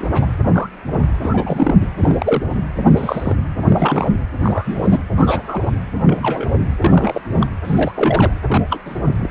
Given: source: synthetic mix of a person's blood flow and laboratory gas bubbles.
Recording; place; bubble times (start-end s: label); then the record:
Doppler ultrasound of blood flow; precordium
0.00-0.10 s: bubbles
0.14-0.27 s: bubbles
0.42-0.69 s: bubbles
0.92-0.97 s: bubbles
1.24-1.75 s: bubbles
1.80-1.89 s: bubbles
2.00-2.64 s: bubbles
2.85-3.35 s: bubbles
3.59-4.21 s: bubbles
4.38-5.00 s: bubbles
5.16-5.71 s: bubbles
6.06-6.47 s: bubbles
6.80-7.21 s: bubbles
7.40-7.46 s: bubbles
7.64-8.33 s: bubbles
8.46-8.63 s: bubbles
8.70-8.81 s: bubbles
8.86-9.01 s: bubbles
9.05-9.29 s: bubbles
From the record:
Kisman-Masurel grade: 242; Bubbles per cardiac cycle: several, 3 to 8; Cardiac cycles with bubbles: 100%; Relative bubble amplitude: moderate (0.250 to 0.450); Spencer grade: 3 (all of the cardiac periods contain showers or single bubble signals, but not dominating or overriding the cardiac motion signals); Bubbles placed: anywhere in the cardiac cycle